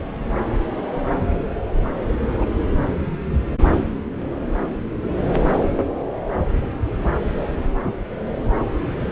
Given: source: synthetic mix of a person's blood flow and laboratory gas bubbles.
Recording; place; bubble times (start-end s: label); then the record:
Doppler ultrasound of blood flow; subclavian vein
2.33-2.45 s: bubbles
From the record:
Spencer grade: 2 (many but less than half of the cardiac periods contain bubble signals, singularly or in groups); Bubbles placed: anywhere in the cardiac cycle